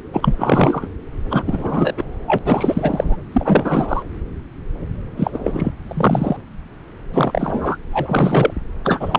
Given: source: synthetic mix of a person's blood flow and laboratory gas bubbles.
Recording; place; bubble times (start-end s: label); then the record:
Doppler ultrasound of blood flow; subclavian vein
0.13-0.88 s: bubbles
1.29-1.44 s: bubbles
1.47-1.93 s: bubbles
1.97-2.04 s: bubbles
2.27-2.39 s: bubbles
2.46-3.16 s: bubbles
3.33-4.03 s: bubbles
5.17-5.30 s: bubbles
5.33-5.71 s: bubbles
5.88-6.37 s: bubbles
7.13-7.77 s: bubbles
7.91-8.54 s: bubbles
8.84-9.19 s: bubbles
From the record:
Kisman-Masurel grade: 333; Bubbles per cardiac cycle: rolling drumbeat, 9 or more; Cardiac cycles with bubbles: 50 to 99%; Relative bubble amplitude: loud (0.450 to 0.775); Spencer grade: 3 (all of the cardiac periods contain showers or single bubble signals, but not dominating or overriding the cardiac motion signals); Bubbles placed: anywhere in the cardiac cycle